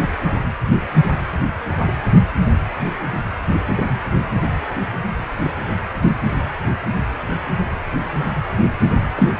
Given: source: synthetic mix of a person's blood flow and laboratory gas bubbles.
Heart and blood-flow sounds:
Doppler ultrasound of blood flow; precordium
9.16-9.29 s: bubbles
From the record:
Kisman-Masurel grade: 113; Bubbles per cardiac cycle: 1 to 2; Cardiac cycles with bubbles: 1 to 10%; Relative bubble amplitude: loud (0.450 to 0.775); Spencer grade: 1 (occasional bubble signal discernible with the cardiac motion signal, with majority of cardiac periods free of bubbles); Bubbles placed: anywhere in the cardiac cycle

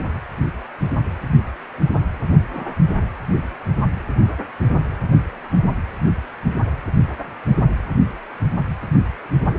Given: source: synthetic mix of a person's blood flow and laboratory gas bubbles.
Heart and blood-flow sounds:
Doppler ultrasound of blood flow; precordium
2.53-2.75 s: bubbles
From the record:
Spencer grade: 1 (occasional bubble signal discernible with the cardiac motion signal, with majority of cardiac periods free of bubbles); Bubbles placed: anywhere in the cardiac cycle

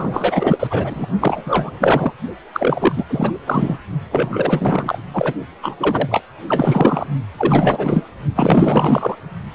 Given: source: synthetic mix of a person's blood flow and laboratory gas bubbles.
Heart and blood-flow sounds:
Doppler ultrasound of blood flow; precordium
0.00-0.67 s: bubbles
0.70-1.06 s: bubbles
1.21-2.14 s: bubbles
2.54-3.05 s: bubbles
3.10-3.32 s: bubbles
3.46-3.78 s: bubbles
4.11-4.99 s: bubbles
5.12-5.33 s: bubbles
5.62-5.75 s: bubbles
5.78-6.22 s: bubbles
6.48-7.07 s: bubbles
7.38-8.06 s: bubbles
8.35-9.16 s: bubbles
From the record:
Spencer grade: 4 (maximum detectable bubble signal sounding continuously throughout systole and diastole of every cardiac period, and overriding the amplitude of the normal cardiac signals); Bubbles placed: only in the low amplitude regions of the cardiac cycle

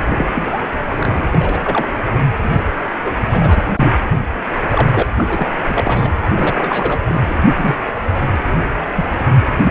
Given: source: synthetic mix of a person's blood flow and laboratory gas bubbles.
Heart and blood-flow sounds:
Doppler ultrasound of blood flow; precordium
0.10-0.29 s: bubbles
0.33-0.59 s: bubbles
0.92-1.25 s: bubbles
1.32-1.60 s: bubbles
1.64-1.88 s: bubbles
2.43-2.51 s: bubbles
3.05-3.13 s: bubbles
3.31-3.62 s: bubbles
3.76-3.92 s: bubbles
4.71-5.02 s: bubbles
5.17-5.47 s: bubbles
5.69-6.10 s: bubbles
6.34-7.03 s: bubbles
7.08-7.21 s: bubbles
7.25-7.35 s: bubbles
7.57-7.76 s: bubbles
8.96-9.05 s: bubbles
9.62-9.71 s: bubbles
From the record:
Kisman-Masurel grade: 242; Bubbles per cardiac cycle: several, 3 to 8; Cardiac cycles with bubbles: 100%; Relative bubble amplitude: moderate (0.250 to 0.450); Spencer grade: 3 (all of the cardiac periods contain showers or single bubble signals, but not dominating or overriding the cardiac motion signals); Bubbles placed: anywhere in the cardiac cycle

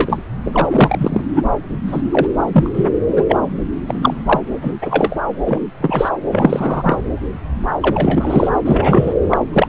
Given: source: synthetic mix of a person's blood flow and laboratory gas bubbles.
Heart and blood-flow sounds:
Doppler ultrasound of blood flow; subclavian vein
0.00-0.22 s: bubbles
0.44-0.67 s: bubbles
0.69-1.25 s: bubbles
1.31-1.42 s: bubbles
1.87-2.02 s: bubbles
2.11-2.27 s: bubbles
2.52-2.69 s: bubbles
2.73-2.89 s: bubbles
3.15-3.25 s: bubbles
3.28-3.37 s: bubbles
3.88-4.40 s: bubbles
4.61-4.74 s: bubbles
4.82-5.16 s: bubbles
5.44-5.60 s: bubbles
5.80-6.09 s: bubbles
6.30-6.99 s: bubbles
7.81-8.55 s: bubbles
8.64-9.14 s: bubbles
9.30-9.38 s: bubbles
9.53-9.68 s: bubbles
From the record:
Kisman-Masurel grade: 233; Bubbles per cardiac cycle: several, 3 to 8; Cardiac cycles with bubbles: 50 to 99%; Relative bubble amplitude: loud (0.450 to 0.775); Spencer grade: 3 (all of the cardiac periods contain showers or single bubble signals, but not dominating or overriding the cardiac motion signals); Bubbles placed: anywhere in the cardiac cycle

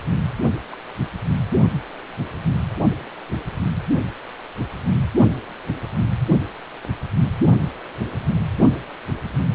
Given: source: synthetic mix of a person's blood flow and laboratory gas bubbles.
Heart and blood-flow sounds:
Doppler ultrasound of blood flow; precordium
0.71-0.78 s: bubbles
From the record:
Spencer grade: 1 (occasional bubble signal discernible with the cardiac motion signal, with majority of cardiac periods free of bubbles); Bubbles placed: only in the low amplitude regions of the cardiac cycle

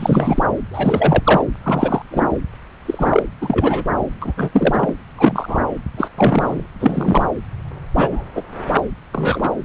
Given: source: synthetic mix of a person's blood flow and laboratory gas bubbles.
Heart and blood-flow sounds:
Doppler ultrasound of blood flow; subclavian vein
0.00-0.43 s: bubbles
0.71-1.43 s: bubbles
1.63-2.02 s: bubbles
2.11-2.25 s: bubbles
2.85-3.23 s: bubbles
3.41-3.85 s: bubbles
4.21-4.32 s: bubbles
4.36-4.50 s: bubbles
4.53-4.95 s: bubbles
5.17-5.58 s: bubbles
5.96-6.08 s: bubbles
6.17-6.66 s: bubbles
6.79-7.26 s: bubbles
7.94-8.24 s: bubbles
8.36-8.43 s: bubbles
8.76-8.82 s: bubbles
9.12-9.50 s: bubbles
From the record:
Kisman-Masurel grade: 243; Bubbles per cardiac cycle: several, 3 to 8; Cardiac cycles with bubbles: 100%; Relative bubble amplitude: loud (0.450 to 0.775); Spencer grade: 3 (all of the cardiac periods contain showers or single bubble signals, but not dominating or overriding the cardiac motion signals); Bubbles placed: anywhere in the cardiac cycle

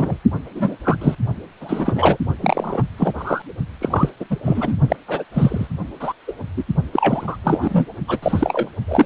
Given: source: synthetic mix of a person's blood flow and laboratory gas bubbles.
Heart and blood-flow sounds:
Doppler ultrasound of blood flow; precordium
0.00-0.18 s: bubbles
0.55-0.77 s: bubbles
0.84-0.96 s: bubbles
1.01-1.15 s: bubbles
1.60-2.17 s: bubbles
2.41-2.83 s: bubbles
2.97-3.12 s: bubbles
3.18-3.42 s: bubbles
3.81-4.10 s: bubbles
4.20-4.25 s: bubbles
4.30-4.37 s: bubbles
4.45-4.75 s: bubbles
4.88-4.96 s: bubbles
5.08-5.24 s: bubbles
5.34-5.67 s: bubbles
6.00-6.13 s: bubbles
6.27-6.33 s: bubbles
6.57-6.64 s: bubbles
6.92-7.37 s: bubbles
7.44-7.85 s: bubbles
8.07-8.19 s: bubbles
8.22-8.69 s: bubbles
8.88-9.06 s: bubbles
From the record:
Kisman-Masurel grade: 233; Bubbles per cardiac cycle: several, 3 to 8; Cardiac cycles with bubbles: 50 to 99%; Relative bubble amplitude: loud (0.450 to 0.775); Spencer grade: 3 (all of the cardiac periods contain showers or single bubble signals, but not dominating or overriding the cardiac motion signals); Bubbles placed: only in the low amplitude regions of the cardiac cycle

